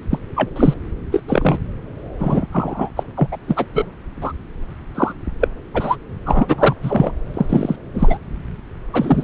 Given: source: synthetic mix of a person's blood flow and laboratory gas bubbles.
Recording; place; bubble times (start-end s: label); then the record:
Doppler ultrasound of blood flow; subclavian vein
0.10-0.18 s: bubbles
0.35-0.49 s: bubbles
0.55-0.74 s: bubbles
1.11-1.23 s: bubbles
1.28-1.58 s: bubbles
2.19-2.46 s: bubbles
2.52-2.90 s: bubbles
2.96-3.03 s: bubbles
3.16-3.28 s: bubbles
3.31-3.37 s: bubbles
3.47-3.66 s: bubbles
3.73-3.85 s: bubbles
4.21-4.33 s: bubbles
4.95-5.13 s: bubbles
5.40-5.48 s: bubbles
5.74-5.96 s: bubbles
6.25-6.76 s: bubbles
6.83-7.12 s: bubbles
7.33-7.46 s: bubbles
7.49-7.76 s: bubbles
7.94-8.17 s: bubbles
8.93-9.24 s: bubbles
From the record:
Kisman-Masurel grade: 233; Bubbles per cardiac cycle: several, 3 to 8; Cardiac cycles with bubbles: 50 to 99%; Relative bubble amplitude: loud (0.450 to 0.775); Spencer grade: 3 (all of the cardiac periods contain showers or single bubble signals, but not dominating or overriding the cardiac motion signals); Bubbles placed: anywhere in the cardiac cycle